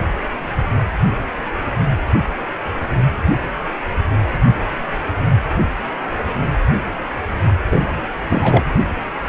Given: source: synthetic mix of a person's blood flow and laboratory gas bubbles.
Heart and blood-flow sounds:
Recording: Doppler ultrasound of blood flow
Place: precordium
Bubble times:
7.71-8.06 s: bubbles
8.29-8.67 s: bubbles
From the record:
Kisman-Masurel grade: 222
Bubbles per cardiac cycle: several, 3 to 8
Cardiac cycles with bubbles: 10 to 50%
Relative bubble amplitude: moderate (0.250 to 0.450)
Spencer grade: 2 (many but less than half of the cardiac periods contain bubble signals, singularly or in groups)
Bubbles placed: anywhere in the cardiac cycle

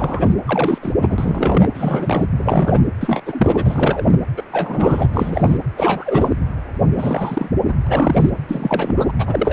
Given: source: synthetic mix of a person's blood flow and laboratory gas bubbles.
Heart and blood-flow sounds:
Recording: Doppler ultrasound of blood flow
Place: precordium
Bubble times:
0.00-0.34 s: bubbles
0.46-0.79 s: bubbles
0.82-0.93 s: bubbles
0.97-1.68 s: bubbles
1.74-2.26 s: bubbles
2.34-2.83 s: bubbles
3.00-3.22 s: bubbles
3.25-4.15 s: bubbles
4.36-4.43 s: bubbles
4.51-5.08 s: bubbles
5.13-5.58 s: bubbles
5.76-6.35 s: bubbles
6.97-7.50 s: bubbles
7.67-7.74 s: bubbles
7.86-8.30 s: bubbles
8.48-9.12 s: bubbles
9.19-9.53 s: bubbles
From the record:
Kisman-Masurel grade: 343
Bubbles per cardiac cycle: rolling drumbeat, 9 or more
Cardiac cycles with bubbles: 100%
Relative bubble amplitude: loud (0.450 to 0.775)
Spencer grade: 3 (all of the cardiac periods contain showers or single bubble signals, but not dominating or overriding the cardiac motion signals)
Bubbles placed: anywhere in the cardiac cycle

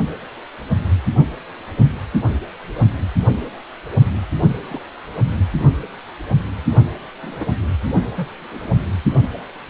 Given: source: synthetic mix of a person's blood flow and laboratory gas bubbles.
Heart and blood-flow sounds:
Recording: Doppler ultrasound of blood flow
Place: precordium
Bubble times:
4.68-4.82 s: bubbles
7.23-7.55 s: bubbles
8.16-8.29 s: bubbles
8.39-8.72 s: bubbles
From the record:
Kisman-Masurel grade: 121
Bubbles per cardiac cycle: 1 to 2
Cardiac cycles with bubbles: 10 to 50%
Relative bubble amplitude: barely perceptible (0.100 to 0.250)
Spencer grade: 2 (many but less than half of the cardiac periods contain bubble signals, singularly or in groups)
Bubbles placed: only in the low amplitude regions of the cardiac cycle

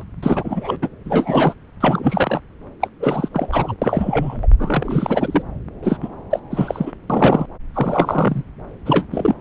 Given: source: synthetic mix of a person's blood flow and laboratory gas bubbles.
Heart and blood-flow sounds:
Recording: Doppler ultrasound of blood flow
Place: subclavian vein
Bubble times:
0.00-0.04 s: bubbles
0.23-0.76 s: bubbles
0.81-0.89 s: bubbles
1.05-1.54 s: bubbles
1.80-2.40 s: bubbles
2.81-2.88 s: bubbles
3.00-3.28 s: bubbles
3.32-3.75 s: bubbles
3.81-4.47 s: bubbles
4.59-5.43 s: bubbles
5.83-5.99 s: bubbles
6.02-6.08 s: bubbles
6.30-6.40 s: bubbles
6.50-6.92 s: bubbles
7.10-7.46 s: bubbles
7.74-8.43 s: bubbles
8.86-9.04 s: bubbles
9.12-9.35 s: bubbles
From the record:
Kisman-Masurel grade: 343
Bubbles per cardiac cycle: rolling drumbeat, 9 or more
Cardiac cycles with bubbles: 100%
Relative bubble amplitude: loud (0.450 to 0.775)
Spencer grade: 3 (all of the cardiac periods contain showers or single bubble signals, but not dominating or overriding the cardiac motion signals)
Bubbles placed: anywhere in the cardiac cycle

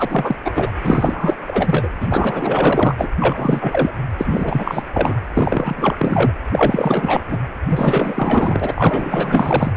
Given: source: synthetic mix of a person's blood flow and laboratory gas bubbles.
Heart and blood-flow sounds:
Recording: Doppler ultrasound of blood flow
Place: precordium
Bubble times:
0.00-0.36 s: bubbles
0.44-0.71 s: bubbles
0.83-1.36 s: bubbles
1.47-1.90 s: bubbles
2.01-2.95 s: bubbles
2.98-3.08 s: bubbles
3.20-3.91 s: bubbles
4.17-4.83 s: bubbles
4.93-5.19 s: bubbles
5.34-6.33 s: bubbles
6.52-7.22 s: bubbles
7.28-7.38 s: bubbles
7.69-8.71 s: bubbles
8.75-9.72 s: bubbles
From the record:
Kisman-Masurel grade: 444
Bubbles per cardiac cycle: continuous sound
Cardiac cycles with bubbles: 100%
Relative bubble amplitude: maximal (0.775 to 0.999)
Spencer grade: 4 (maximum detectable bubble signal sounding continuously throughout systole and diastole of every cardiac period, and overriding the amplitude of the normal cardiac signals)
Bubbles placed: anywhere in the cardiac cycle

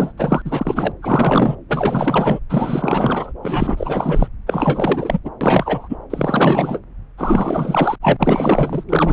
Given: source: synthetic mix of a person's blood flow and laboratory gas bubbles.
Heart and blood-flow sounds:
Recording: Doppler ultrasound of blood flow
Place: subclavian vein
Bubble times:
0.00-0.12 s: bubbles
0.18-0.92 s: bubbles
1.02-1.55 s: bubbles
1.68-2.39 s: bubbles
2.49-3.33 s: bubbles
3.42-4.28 s: bubbles
4.46-5.19 s: bubbles
5.25-5.30 s: bubbles
5.41-5.96 s: bubbles
6.10-6.79 s: bubbles
7.17-7.97 s: bubbles
8.01-8.16 s: bubbles
8.19-8.83 s: bubbles
8.88-9.13 s: bubbles
From the record:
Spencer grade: 4 (maximum detectable bubble signal sounding continuously throughout systole and diastole of every cardiac period, and overriding the amplitude of the normal cardiac signals)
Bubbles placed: anywhere in the cardiac cycle

